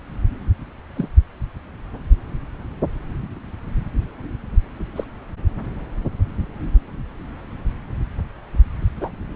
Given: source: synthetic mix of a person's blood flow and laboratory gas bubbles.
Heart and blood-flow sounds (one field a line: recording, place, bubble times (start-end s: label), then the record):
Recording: Doppler ultrasound of blood flow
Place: subclavian vein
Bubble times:
0.95-1.08 s: bubbles
4.96-5.04 s: bubbles
9.00-9.11 s: bubbles
From the record:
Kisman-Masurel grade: 122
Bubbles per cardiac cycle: 1 to 2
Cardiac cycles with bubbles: 10 to 50%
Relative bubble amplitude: moderate (0.250 to 0.450)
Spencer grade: 2 (many but less than half of the cardiac periods contain bubble signals, singularly or in groups)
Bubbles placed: anywhere in the cardiac cycle